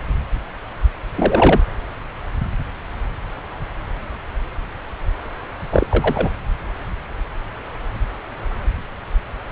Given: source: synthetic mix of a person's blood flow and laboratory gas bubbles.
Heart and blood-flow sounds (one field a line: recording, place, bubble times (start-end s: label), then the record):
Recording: Doppler ultrasound of blood flow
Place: subclavian vein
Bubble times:
1.16-1.60 s: bubbles
5.72-5.87 s: bubbles
5.89-6.29 s: bubbles
From the record:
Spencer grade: 2 (many but less than half of the cardiac periods contain bubble signals, singularly or in groups)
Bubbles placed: anywhere in the cardiac cycle